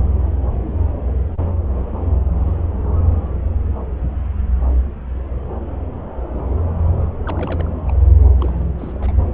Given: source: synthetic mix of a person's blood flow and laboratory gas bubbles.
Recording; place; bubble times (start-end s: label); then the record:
Doppler ultrasound of blood flow; subclavian vein
7.26-7.71 s: bubbles
7.87-7.92 s: bubbles
8.40-8.52 s: bubbles
8.54-8.70 s: bubbles
8.78-9.12 s: bubbles
From the record:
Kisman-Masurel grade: 221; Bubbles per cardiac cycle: several, 3 to 8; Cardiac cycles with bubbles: 10 to 50%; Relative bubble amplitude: barely perceptible (0.100 to 0.250); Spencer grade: 2 (many but less than half of the cardiac periods contain bubble signals, singularly or in groups); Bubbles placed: anywhere in the cardiac cycle